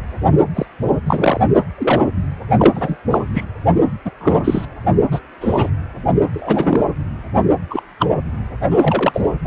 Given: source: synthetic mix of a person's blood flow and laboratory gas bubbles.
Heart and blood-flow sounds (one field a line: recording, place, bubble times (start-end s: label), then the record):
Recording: Doppler ultrasound of blood flow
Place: precordium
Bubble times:
0.55-0.66 s: bubbles
1.06-1.40 s: bubbles
1.78-2.02 s: bubbles
2.58-2.97 s: bubbles
3.10-3.18 s: bubbles
3.33-3.44 s: bubbles
4.05-4.11 s: bubbles
4.20-4.41 s: bubbles
4.44-4.66 s: bubbles
5.11-5.20 s: bubbles
5.41-5.70 s: bubbles
6.33-6.86 s: bubbles
7.70-7.83 s: bubbles
7.99-8.10 s: bubbles
8.71-9.28 s: bubbles
9.45-9.47 s: bubbles
From the record:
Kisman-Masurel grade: 243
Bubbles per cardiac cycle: several, 3 to 8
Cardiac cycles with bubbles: 100%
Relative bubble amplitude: loud (0.450 to 0.775)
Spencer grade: 3 (all of the cardiac periods contain showers or single bubble signals, but not dominating or overriding the cardiac motion signals)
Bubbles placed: only in the low amplitude regions of the cardiac cycle